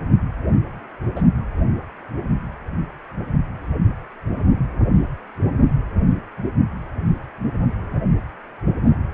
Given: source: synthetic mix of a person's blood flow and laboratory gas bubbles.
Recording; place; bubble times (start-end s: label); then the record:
Doppler ultrasound of blood flow; precordium
1.15-1.23 s: bubbles
From the record:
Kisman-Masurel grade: 112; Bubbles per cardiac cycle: 1 to 2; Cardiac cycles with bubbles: 1 to 10%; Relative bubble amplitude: moderate (0.250 to 0.450); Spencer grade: 1 (occasional bubble signal discernible with the cardiac motion signal, with majority of cardiac periods free of bubbles); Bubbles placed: anywhere in the cardiac cycle